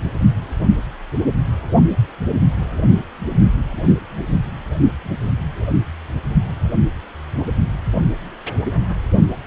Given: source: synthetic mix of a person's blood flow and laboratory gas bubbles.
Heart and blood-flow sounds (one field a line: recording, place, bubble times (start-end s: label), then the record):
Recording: Doppler ultrasound of blood flow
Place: precordium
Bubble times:
no bubbles
From the record:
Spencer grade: 0 (complete lack of bubble signals)